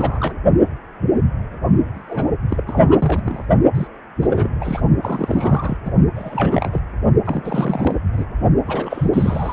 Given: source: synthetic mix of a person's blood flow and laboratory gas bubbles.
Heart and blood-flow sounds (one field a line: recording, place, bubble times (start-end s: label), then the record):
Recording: Doppler ultrasound of blood flow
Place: precordium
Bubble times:
0.00-0.35 s: bubbles
1.94-2.27 s: bubbles
2.49-3.46 s: bubbles
3.74-3.88 s: bubbles
4.21-4.56 s: bubbles
4.61-4.81 s: bubbles
5.02-5.77 s: bubbles
5.85-5.90 s: bubbles
6.15-6.82 s: bubbles
7.25-7.95 s: bubbles
8.12-8.24 s: bubbles
8.67-9.11 s: bubbles
9.13-9.53 s: bubbles
From the record:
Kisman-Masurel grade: 332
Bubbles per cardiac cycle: rolling drumbeat, 9 or more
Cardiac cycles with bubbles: 50 to 99%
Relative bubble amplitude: moderate (0.250 to 0.450)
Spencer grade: 3 (all of the cardiac periods contain showers or single bubble signals, but not dominating or overriding the cardiac motion signals)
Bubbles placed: only in the low amplitude regions of the cardiac cycle